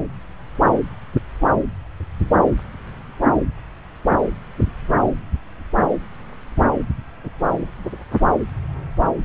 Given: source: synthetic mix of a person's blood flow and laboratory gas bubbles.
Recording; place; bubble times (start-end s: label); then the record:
Doppler ultrasound of blood flow; subclavian vein
no bubbles
From the record:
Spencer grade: 0 (complete lack of bubble signals)